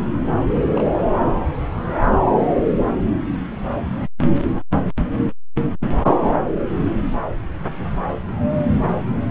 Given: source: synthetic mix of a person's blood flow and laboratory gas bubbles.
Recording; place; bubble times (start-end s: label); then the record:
Doppler ultrasound of blood flow; subclavian vein
0.54-0.59 s: bubbles
0.67-0.94 s: bubbles
1.08-1.27 s: bubbles
From the record:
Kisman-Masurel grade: 211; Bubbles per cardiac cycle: several, 3 to 8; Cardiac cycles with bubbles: 1 to 10%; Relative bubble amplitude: barely perceptible (0.100 to 0.250); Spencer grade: 1 (occasional bubble signal discernible with the cardiac motion signal, with majority of cardiac periods free of bubbles); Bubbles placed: anywhere in the cardiac cycle